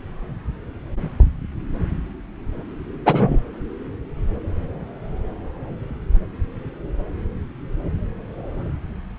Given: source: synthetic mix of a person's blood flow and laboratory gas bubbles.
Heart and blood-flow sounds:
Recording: Doppler ultrasound of blood flow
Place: subclavian vein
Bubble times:
3.05-3.42 s: bubbles
From the record:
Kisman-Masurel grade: 113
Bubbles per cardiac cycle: 1 to 2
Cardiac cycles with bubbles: 1 to 10%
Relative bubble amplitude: loud (0.450 to 0.775)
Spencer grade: 1 (occasional bubble signal discernible with the cardiac motion signal, with majority of cardiac periods free of bubbles)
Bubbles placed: anywhere in the cardiac cycle

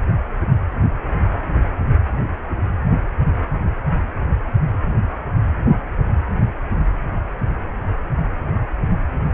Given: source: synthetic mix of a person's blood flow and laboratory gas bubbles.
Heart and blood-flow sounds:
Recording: Doppler ultrasound of blood flow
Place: precordium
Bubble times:
no bubbles
From the record:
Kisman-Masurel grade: 000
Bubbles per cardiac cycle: 0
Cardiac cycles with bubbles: 0%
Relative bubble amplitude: no bubbles discernible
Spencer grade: 0 (complete lack of bubble signals)

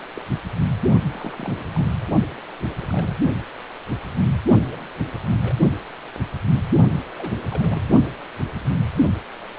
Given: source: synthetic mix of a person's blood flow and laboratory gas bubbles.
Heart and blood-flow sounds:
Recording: Doppler ultrasound of blood flow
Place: precordium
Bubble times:
0.14-0.22 s: bubbles
1.07-1.63 s: bubbles
1.74-1.89 s: bubbles
2.69-2.75 s: bubbles
2.80-2.85 s: bubbles
2.89-3.15 s: bubbles
4.69-4.88 s: bubbles
5.30-5.36 s: bubbles
5.44-5.54 s: bubbles
6.97-7.02 s: bubbles
7.17-7.35 s: bubbles
7.50-7.92 s: bubbles
From the record:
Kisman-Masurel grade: 221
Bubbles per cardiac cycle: several, 3 to 8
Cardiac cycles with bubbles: 10 to 50%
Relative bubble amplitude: barely perceptible (0.100 to 0.250)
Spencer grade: 2 (many but less than half of the cardiac periods contain bubble signals, singularly or in groups)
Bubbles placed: only in the low amplitude regions of the cardiac cycle

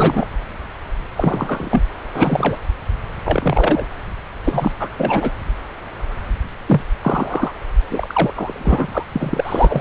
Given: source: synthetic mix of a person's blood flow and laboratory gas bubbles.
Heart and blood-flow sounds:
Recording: Doppler ultrasound of blood flow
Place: subclavian vein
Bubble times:
0.00-0.27 s: bubbles
1.17-1.83 s: bubbles
2.14-2.58 s: bubbles
3.24-3.85 s: bubbles
4.44-4.72 s: bubbles
4.80-4.89 s: bubbles
4.97-5.32 s: bubbles
6.68-6.81 s: bubbles
7.02-7.51 s: bubbles
7.90-9.03 s: bubbles
9.12-9.81 s: bubbles
From the record:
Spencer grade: 3 (all of the cardiac periods contain showers or single bubble signals, but not dominating or overriding the cardiac motion signals)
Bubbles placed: anywhere in the cardiac cycle

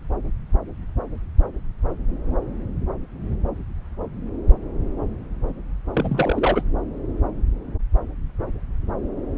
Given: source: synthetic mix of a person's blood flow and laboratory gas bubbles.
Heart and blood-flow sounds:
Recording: Doppler ultrasound of blood flow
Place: subclavian vein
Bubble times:
5.93-6.62 s: bubbles
From the record:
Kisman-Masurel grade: 212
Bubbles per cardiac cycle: several, 3 to 8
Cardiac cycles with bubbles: 1 to 10%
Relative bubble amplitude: moderate (0.250 to 0.450)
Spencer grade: 1 (occasional bubble signal discernible with the cardiac motion signal, with majority of cardiac periods free of bubbles)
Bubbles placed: anywhere in the cardiac cycle

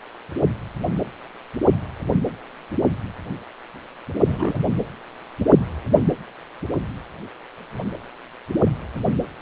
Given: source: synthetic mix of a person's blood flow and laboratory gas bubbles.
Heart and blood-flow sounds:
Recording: Doppler ultrasound of blood flow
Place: precordium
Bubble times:
4.24-4.59 s: bubbles
From the record:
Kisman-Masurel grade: 221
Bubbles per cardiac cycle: several, 3 to 8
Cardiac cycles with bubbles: 10 to 50%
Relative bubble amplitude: barely perceptible (0.100 to 0.250)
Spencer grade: 2 (many but less than half of the cardiac periods contain bubble signals, singularly or in groups)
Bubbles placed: anywhere in the cardiac cycle

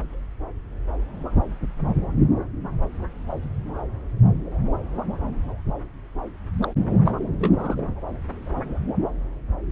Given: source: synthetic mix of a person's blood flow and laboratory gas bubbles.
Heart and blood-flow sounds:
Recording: Doppler ultrasound of blood flow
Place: subclavian vein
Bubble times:
6.62-6.67 s: bubbles
7.05-7.12 s: bubbles
7.39-7.81 s: bubbles
From the record:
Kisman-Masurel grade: 211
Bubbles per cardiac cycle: several, 3 to 8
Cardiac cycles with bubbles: 1 to 10%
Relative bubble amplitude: barely perceptible (0.100 to 0.250)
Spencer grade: 1 (occasional bubble signal discernible with the cardiac motion signal, with majority of cardiac periods free of bubbles)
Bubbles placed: anywhere in the cardiac cycle

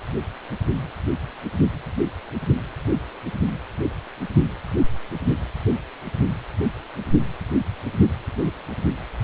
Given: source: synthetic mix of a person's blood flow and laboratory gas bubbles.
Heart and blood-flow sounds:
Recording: Doppler ultrasound of blood flow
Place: precordium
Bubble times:
9.20-9.24 s: bubbles
From the record:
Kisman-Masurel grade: 213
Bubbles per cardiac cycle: several, 3 to 8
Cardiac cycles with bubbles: 1 to 10%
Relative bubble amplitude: loud (0.450 to 0.775)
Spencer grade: 1 (occasional bubble signal discernible with the cardiac motion signal, with majority of cardiac periods free of bubbles)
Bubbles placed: anywhere in the cardiac cycle

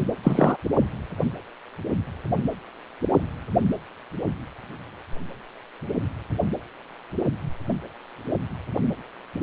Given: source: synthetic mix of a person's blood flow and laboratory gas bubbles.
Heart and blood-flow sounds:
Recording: Doppler ultrasound of blood flow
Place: precordium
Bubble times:
0.23-0.57 s: bubbles
From the record:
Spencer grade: 2 (many but less than half of the cardiac periods contain bubble signals, singularly or in groups)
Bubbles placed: anywhere in the cardiac cycle

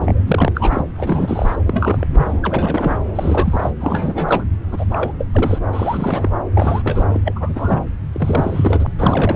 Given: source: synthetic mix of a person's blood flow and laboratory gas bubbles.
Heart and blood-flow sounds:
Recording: Doppler ultrasound of blood flow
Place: subclavian vein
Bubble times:
0.01-0.23 s: bubbles
0.27-0.84 s: bubbles
0.95-1.55 s: bubbles
1.66-2.07 s: bubbles
2.13-2.98 s: bubbles
3.15-3.70 s: bubbles
3.79-4.44 s: bubbles
4.71-4.86 s: bubbles
4.90-5.14 s: bubbles
5.18-5.28 s: bubbles
5.33-5.58 s: bubbles
5.73-6.31 s: bubbles
6.54-7.19 s: bubbles
7.24-7.85 s: bubbles
8.12-8.87 s: bubbles
8.99-9.36 s: bubbles
From the record:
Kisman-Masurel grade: 342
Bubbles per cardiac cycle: rolling drumbeat, 9 or more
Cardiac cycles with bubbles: 100%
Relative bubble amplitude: moderate (0.250 to 0.450)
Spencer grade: 3 (all of the cardiac periods contain showers or single bubble signals, but not dominating or overriding the cardiac motion signals)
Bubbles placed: anywhere in the cardiac cycle

